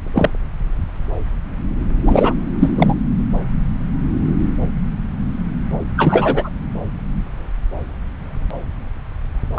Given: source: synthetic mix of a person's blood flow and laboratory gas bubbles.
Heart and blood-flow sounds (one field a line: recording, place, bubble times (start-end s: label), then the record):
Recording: Doppler ultrasound of blood flow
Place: subclavian vein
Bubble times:
0.15-0.30 s: bubbles
2.05-2.34 s: bubbles
2.60-2.73 s: bubbles
2.75-2.94 s: bubbles
5.97-6.50 s: bubbles
9.54-9.59 s: bubbles
From the record:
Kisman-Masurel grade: 223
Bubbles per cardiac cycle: several, 3 to 8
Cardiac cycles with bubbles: 10 to 50%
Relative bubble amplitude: loud (0.450 to 0.775)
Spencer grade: 2 (many but less than half of the cardiac periods contain bubble signals, singularly or in groups)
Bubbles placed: anywhere in the cardiac cycle